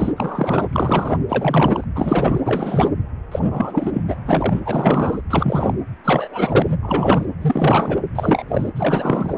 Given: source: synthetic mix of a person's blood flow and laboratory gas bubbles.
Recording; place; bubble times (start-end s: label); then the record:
Doppler ultrasound of blood flow; precordium
0.00-0.13 s: bubbles
0.16-0.68 s: bubbles
0.72-1.17 s: bubbles
1.29-1.84 s: bubbles
1.95-2.40 s: bubbles
2.45-2.91 s: bubbles
3.31-4.02 s: bubbles
4.07-4.17 s: bubbles
4.25-4.61 s: bubbles
4.65-5.21 s: bubbles
5.29-5.73 s: bubbles
6.04-6.78 s: bubbles
6.82-7.28 s: bubbles
7.41-7.98 s: bubbles
8.15-8.45 s: bubbles
8.48-8.71 s: bubbles
8.75-9.35 s: bubbles
From the record:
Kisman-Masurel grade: 343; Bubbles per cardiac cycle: rolling drumbeat, 9 or more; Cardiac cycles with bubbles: 100%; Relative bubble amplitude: loud (0.450 to 0.775); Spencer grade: 3 (all of the cardiac periods contain showers or single bubble signals, but not dominating or overriding the cardiac motion signals); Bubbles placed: anywhere in the cardiac cycle